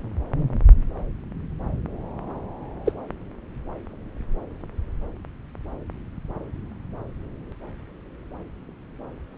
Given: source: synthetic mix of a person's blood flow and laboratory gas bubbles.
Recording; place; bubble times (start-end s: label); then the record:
Doppler ultrasound of blood flow; subclavian vein
2.85-2.92 s: bubbles
From the record:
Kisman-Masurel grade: 112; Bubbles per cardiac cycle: 1 to 2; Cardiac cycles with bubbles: 1 to 10%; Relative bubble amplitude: moderate (0.250 to 0.450); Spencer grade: 1 (occasional bubble signal discernible with the cardiac motion signal, with majority of cardiac periods free of bubbles); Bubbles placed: anywhere in the cardiac cycle